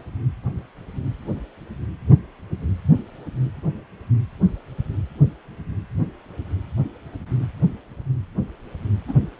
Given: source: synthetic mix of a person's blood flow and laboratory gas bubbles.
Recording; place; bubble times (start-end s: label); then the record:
Doppler ultrasound of blood flow; precordium
9.07-9.14 s: bubbles
From the record:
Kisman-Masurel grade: 111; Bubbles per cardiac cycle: 1 to 2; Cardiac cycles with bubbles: 1 to 10%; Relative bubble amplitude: barely perceptible (0.100 to 0.250); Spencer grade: 1 (occasional bubble signal discernible with the cardiac motion signal, with majority of cardiac periods free of bubbles); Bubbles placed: anywhere in the cardiac cycle